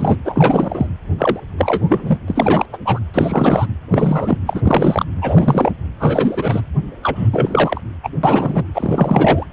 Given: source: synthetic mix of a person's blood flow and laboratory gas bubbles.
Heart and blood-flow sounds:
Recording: Doppler ultrasound of blood flow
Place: precordium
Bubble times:
0.00-0.17 s: bubbles
0.24-0.87 s: bubbles
1.18-1.40 s: bubbles
1.57-2.18 s: bubbles
2.28-2.66 s: bubbles
2.72-2.78 s: bubbles
2.84-2.99 s: bubbles
3.13-3.67 s: bubbles
3.91-4.38 s: bubbles
4.46-4.62 s: bubbles
4.65-5.04 s: bubbles
5.21-5.72 s: bubbles
6.00-6.61 s: bubbles
7.03-7.29 s: bubbles
7.33-7.81 s: bubbles
8.03-8.10 s: bubbles
8.23-8.63 s: bubbles
8.74-9.46 s: bubbles
From the record:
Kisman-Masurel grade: 343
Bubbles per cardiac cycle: rolling drumbeat, 9 or more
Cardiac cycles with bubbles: 100%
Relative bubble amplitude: loud (0.450 to 0.775)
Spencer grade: 3 (all of the cardiac periods contain showers or single bubble signals, but not dominating or overriding the cardiac motion signals)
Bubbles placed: anywhere in the cardiac cycle

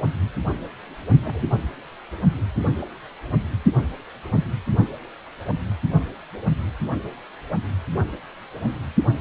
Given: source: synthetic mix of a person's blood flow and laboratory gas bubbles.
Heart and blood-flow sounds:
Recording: Doppler ultrasound of blood flow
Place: precordium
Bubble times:
1.25-1.45 s: bubbles
From the record:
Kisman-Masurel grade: 121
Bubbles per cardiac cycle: 1 to 2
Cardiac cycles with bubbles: 10 to 50%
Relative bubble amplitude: barely perceptible (0.100 to 0.250)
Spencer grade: 2 (many but less than half of the cardiac periods contain bubble signals, singularly or in groups)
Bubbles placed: only in the low amplitude regions of the cardiac cycle

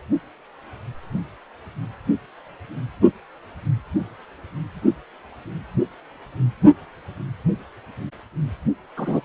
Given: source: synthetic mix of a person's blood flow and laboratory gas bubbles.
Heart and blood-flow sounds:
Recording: Doppler ultrasound of blood flow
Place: precordium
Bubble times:
8.96-9.21 s: bubbles
From the record:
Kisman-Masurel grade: 212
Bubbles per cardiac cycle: several, 3 to 8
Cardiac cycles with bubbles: 1 to 10%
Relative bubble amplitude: moderate (0.250 to 0.450)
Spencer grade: 1 (occasional bubble signal discernible with the cardiac motion signal, with majority of cardiac periods free of bubbles)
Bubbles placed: only in the low amplitude regions of the cardiac cycle

